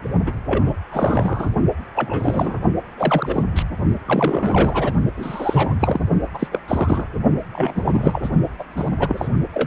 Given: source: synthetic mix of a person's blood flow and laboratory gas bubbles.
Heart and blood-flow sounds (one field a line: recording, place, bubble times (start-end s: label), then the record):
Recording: Doppler ultrasound of blood flow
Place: precordium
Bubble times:
0.26-0.32 s: bubbles
0.46-0.76 s: bubbles
0.91-1.48 s: bubbles
1.95-2.61 s: bubbles
2.98-3.43 s: bubbles
3.56-3.63 s: bubbles
4.06-4.93 s: bubbles
5.17-5.75 s: bubbles
5.79-6.03 s: bubbles
6.33-6.47 s: bubbles
6.51-6.59 s: bubbles
6.68-7.05 s: bubbles
7.53-8.30 s: bubbles
8.58-8.63 s: bubbles
8.76-8.88 s: bubbles
8.97-9.29 s: bubbles
9.51-9.67 s: bubbles
From the record:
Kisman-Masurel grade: 342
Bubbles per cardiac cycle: rolling drumbeat, 9 or more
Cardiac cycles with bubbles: 100%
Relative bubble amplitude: moderate (0.250 to 0.450)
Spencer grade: 3 (all of the cardiac periods contain showers or single bubble signals, but not dominating or overriding the cardiac motion signals)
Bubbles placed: only in the low amplitude regions of the cardiac cycle